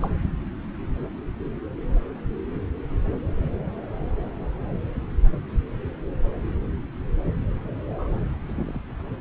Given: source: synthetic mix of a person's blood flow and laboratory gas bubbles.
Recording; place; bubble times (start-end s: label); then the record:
Doppler ultrasound of blood flow; subclavian vein
0.00-0.10 s: bubbles
7.90-8.22 s: bubbles
8.48-8.52 s: bubbles
8.54-8.80 s: bubbles
From the record:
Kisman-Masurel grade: 221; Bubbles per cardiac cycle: several, 3 to 8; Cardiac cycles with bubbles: 10 to 50%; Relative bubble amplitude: barely perceptible (0.100 to 0.250); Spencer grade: 2 (many but less than half of the cardiac periods contain bubble signals, singularly or in groups); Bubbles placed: anywhere in the cardiac cycle